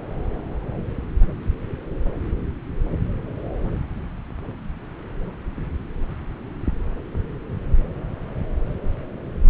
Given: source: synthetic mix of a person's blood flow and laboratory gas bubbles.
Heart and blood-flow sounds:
Doppler ultrasound of blood flow; subclavian vein
no bubbles
From the record:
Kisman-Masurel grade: 000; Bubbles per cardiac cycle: 0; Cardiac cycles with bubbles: 0%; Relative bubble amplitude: no bubbles discernible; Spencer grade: 0 (complete lack of bubble signals)

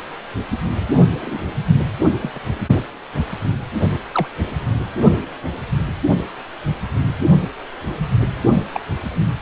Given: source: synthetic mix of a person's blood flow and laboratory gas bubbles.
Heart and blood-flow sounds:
Doppler ultrasound of blood flow; precordium
1.19-1.43 s: bubbles
2.21-2.39 s: bubbles
4.12-4.26 s: bubbles
8.73-8.80 s: bubbles
From the record:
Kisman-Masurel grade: 122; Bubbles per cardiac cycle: 1 to 2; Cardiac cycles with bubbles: 10 to 50%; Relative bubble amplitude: moderate (0.250 to 0.450); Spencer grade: 2 (many but less than half of the cardiac periods contain bubble signals, singularly or in groups); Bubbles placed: only in the low amplitude regions of the cardiac cycle

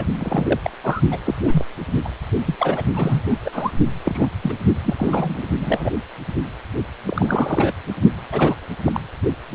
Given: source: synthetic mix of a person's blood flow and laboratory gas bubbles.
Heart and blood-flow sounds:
Doppler ultrasound of blood flow; precordium
0.00-0.04 s: bubbles
0.19-0.59 s: bubbles
0.64-0.70 s: bubbles
0.82-1.01 s: bubbles
1.10-1.19 s: bubbles
1.23-1.34 s: bubbles
1.43-1.65 s: bubbles
2.04-2.09 s: bubbles
2.45-2.56 s: bubbles
2.58-2.83 s: bubbles
2.94-3.40 s: bubbles
3.45-3.72 s: bubbles
4.04-4.29 s: bubbles
4.42-4.54 s: bubbles
4.84-4.95 s: bubbles
4.97-5.47 s: bubbles
5.59-5.91 s: bubbles
7.07-7.75 s: bubbles
8.32-8.55 s: bubbles
8.86-9.01 s: bubbles
From the record:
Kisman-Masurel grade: 242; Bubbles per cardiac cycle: several, 3 to 8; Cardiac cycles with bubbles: 100%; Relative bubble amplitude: moderate (0.250 to 0.450); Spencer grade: 3 (all of the cardiac periods contain showers or single bubble signals, but not dominating or overriding the cardiac motion signals); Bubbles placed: only in the low amplitude regions of the cardiac cycle

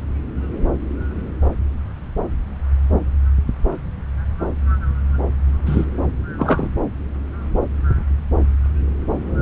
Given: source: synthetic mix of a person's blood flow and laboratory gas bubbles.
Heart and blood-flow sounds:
Doppler ultrasound of blood flow; subclavian vein
5.66-5.85 s: bubbles
6.38-6.68 s: bubbles
From the record:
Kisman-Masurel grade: 113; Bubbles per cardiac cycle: 1 to 2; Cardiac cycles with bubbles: 1 to 10%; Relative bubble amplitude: loud (0.450 to 0.775); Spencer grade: 1 (occasional bubble signal discernible with the cardiac motion signal, with majority of cardiac periods free of bubbles); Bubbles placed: anywhere in the cardiac cycle

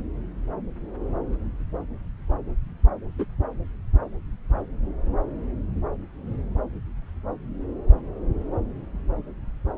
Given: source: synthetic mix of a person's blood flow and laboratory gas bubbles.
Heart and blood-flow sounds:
Doppler ultrasound of blood flow; subclavian vein
3.19-3.25 s: bubbles
From the record:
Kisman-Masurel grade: 112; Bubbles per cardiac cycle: 1 to 2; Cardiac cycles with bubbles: 1 to 10%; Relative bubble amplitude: moderate (0.250 to 0.450); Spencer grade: 1 (occasional bubble signal discernible with the cardiac motion signal, with majority of cardiac periods free of bubbles); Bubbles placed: anywhere in the cardiac cycle

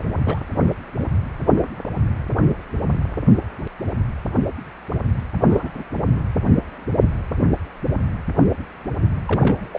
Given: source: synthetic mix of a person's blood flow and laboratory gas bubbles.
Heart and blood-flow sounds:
Doppler ultrasound of blood flow; precordium
0.00-0.05 s: bubbles
0.24-0.38 s: bubbles
5.43-5.69 s: bubbles
5.74-5.83 s: bubbles
5.92-6.21 s: bubbles
9.26-9.79 s: bubbles
From the record:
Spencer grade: 2 (many but less than half of the cardiac periods contain bubble signals, singularly or in groups); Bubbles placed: anywhere in the cardiac cycle

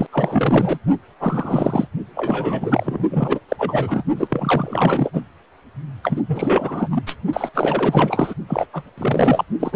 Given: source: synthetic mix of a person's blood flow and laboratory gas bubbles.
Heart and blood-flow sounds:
Doppler ultrasound of blood flow; precordium
0.00-0.08 s: bubbles
0.12-0.79 s: bubbles
1.19-1.88 s: bubbles
2.15-3.40 s: bubbles
3.49-4.04 s: bubbles
4.16-5.10 s: bubbles
5.13-5.21 s: bubbles
6.03-6.23 s: bubbles
6.26-7.03 s: bubbles
7.07-7.16 s: bubbles
7.33-7.50 s: bubbles
7.53-8.34 s: bubbles
8.47-8.66 s: bubbles
8.72-8.90 s: bubbles
8.97-9.43 s: bubbles
9.59-9.76 s: bubbles
From the record:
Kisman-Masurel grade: 444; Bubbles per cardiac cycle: continuous sound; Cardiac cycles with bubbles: 100%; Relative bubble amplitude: maximal (0.775 to 0.999); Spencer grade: 4 (maximum detectable bubble signal sounding continuously throughout systole and diastole of every cardiac period, and overriding the amplitude of the normal cardiac signals); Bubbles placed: only in the low amplitude regions of the cardiac cycle

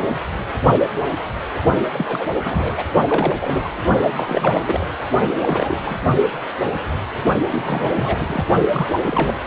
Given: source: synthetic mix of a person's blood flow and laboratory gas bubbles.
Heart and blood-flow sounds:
Doppler ultrasound of blood flow; precordium
1.93-2.27 s: bubbles
2.44-2.84 s: bubbles
3.08-3.34 s: bubbles
3.41-3.69 s: bubbles
4.17-4.92 s: bubbles
5.32-5.79 s: bubbles
5.84-5.96 s: bubbles
7.51-8.45 s: bubbles
8.71-8.88 s: bubbles
9.02-9.35 s: bubbles
From the record:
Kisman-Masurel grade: 332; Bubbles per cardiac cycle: rolling drumbeat, 9 or more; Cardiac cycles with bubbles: 50 to 99%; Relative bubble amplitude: moderate (0.250 to 0.450); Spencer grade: 3 (all of the cardiac periods contain showers or single bubble signals, but not dominating or overriding the cardiac motion signals); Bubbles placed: only in the low amplitude regions of the cardiac cycle

